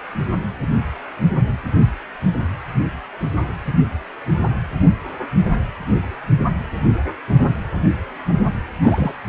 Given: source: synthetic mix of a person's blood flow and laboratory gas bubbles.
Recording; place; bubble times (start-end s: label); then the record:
Doppler ultrasound of blood flow; precordium
8.81-9.12 s: bubbles
From the record:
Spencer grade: 1 (occasional bubble signal discernible with the cardiac motion signal, with majority of cardiac periods free of bubbles); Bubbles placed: only in the low amplitude regions of the cardiac cycle